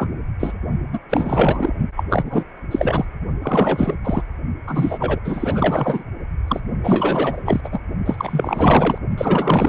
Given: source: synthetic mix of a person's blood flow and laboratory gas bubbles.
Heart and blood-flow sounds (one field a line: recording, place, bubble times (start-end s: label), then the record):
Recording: Doppler ultrasound of blood flow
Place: precordium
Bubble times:
0.00-0.10 s: bubbles
0.40-0.53 s: bubbles
0.93-0.99 s: bubbles
1.09-1.74 s: bubbles
1.96-2.03 s: bubbles
2.09-2.45 s: bubbles
2.71-3.05 s: bubbles
3.42-3.95 s: bubbles
4.04-4.24 s: bubbles
4.67-5.20 s: bubbles
5.24-6.04 s: bubbles
6.48-6.61 s: bubbles
6.83-7.61 s: bubbles
7.64-7.80 s: bubbles
8.05-8.98 s: bubbles
9.17-9.69 s: bubbles
From the record:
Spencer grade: 4 (maximum detectable bubble signal sounding continuously throughout systole and diastole of every cardiac period, and overriding the amplitude of the normal cardiac signals)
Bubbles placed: only in the low amplitude regions of the cardiac cycle